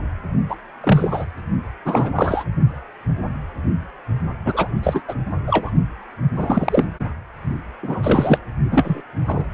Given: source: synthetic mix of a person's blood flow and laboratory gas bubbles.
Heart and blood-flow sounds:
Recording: Doppler ultrasound of blood flow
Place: precordium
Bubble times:
0.48-0.56 s: bubbles
0.83-1.26 s: bubbles
1.85-2.12 s: bubbles
2.16-2.44 s: bubbles
4.45-4.72 s: bubbles
4.83-5.01 s: bubbles
5.08-5.15 s: bubbles
5.47-5.71 s: bubbles
6.37-6.85 s: bubbles
7.82-8.38 s: bubbles
8.70-9.02 s: bubbles
9.26-9.44 s: bubbles
From the record:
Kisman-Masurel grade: 233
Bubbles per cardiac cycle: several, 3 to 8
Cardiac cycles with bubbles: 50 to 99%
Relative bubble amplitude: loud (0.450 to 0.775)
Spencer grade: 3 (all of the cardiac periods contain showers or single bubble signals, but not dominating or overriding the cardiac motion signals)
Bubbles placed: only in the low amplitude regions of the cardiac cycle

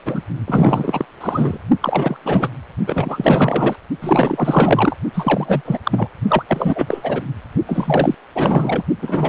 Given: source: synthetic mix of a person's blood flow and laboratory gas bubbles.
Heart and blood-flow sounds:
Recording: Doppler ultrasound of blood flow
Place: precordium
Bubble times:
0.05-0.22 s: bubbles
0.47-1.05 s: bubbles
1.20-1.59 s: bubbles
1.80-2.17 s: bubbles
2.25-2.50 s: bubbles
2.86-3.76 s: bubbles
4.01-4.97 s: bubbles
5.14-5.61 s: bubbles
5.65-5.79 s: bubbles
5.83-6.08 s: bubbles
6.28-6.43 s: bubbles
6.47-7.22 s: bubbles
7.67-8.15 s: bubbles
8.35-8.83 s: bubbles
9.02-9.29 s: bubbles
From the record:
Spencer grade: 4 (maximum detectable bubble signal sounding continuously throughout systole and diastole of every cardiac period, and overriding the amplitude of the normal cardiac signals)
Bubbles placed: only in the low amplitude regions of the cardiac cycle

